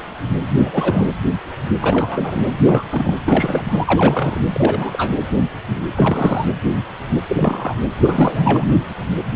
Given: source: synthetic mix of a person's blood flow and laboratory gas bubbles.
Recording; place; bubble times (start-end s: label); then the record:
Doppler ultrasound of blood flow; precordium
0.56-1.15 s: bubbles
1.80-2.54 s: bubbles
2.62-2.85 s: bubbles
2.91-3.18 s: bubbles
3.25-3.63 s: bubbles
3.68-4.42 s: bubbles
4.53-5.18 s: bubbles
5.96-6.48 s: bubbles
7.29-7.74 s: bubbles
8.00-8.64 s: bubbles
From the record:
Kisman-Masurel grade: 332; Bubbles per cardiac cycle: rolling drumbeat, 9 or more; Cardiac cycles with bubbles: 50 to 99%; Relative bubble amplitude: moderate (0.250 to 0.450); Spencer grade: 3 (all of the cardiac periods contain showers or single bubble signals, but not dominating or overriding the cardiac motion signals); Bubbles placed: anywhere in the cardiac cycle